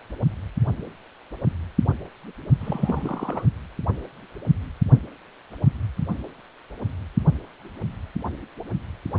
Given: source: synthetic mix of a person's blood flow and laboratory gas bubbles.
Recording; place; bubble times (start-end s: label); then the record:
Doppler ultrasound of blood flow; precordium
2.60-3.44 s: bubbles
From the record:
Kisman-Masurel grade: 211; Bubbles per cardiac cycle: several, 3 to 8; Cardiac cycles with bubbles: 1 to 10%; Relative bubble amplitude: barely perceptible (0.100 to 0.250); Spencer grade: 1 (occasional bubble signal discernible with the cardiac motion signal, with majority of cardiac periods free of bubbles); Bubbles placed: only in the low amplitude regions of the cardiac cycle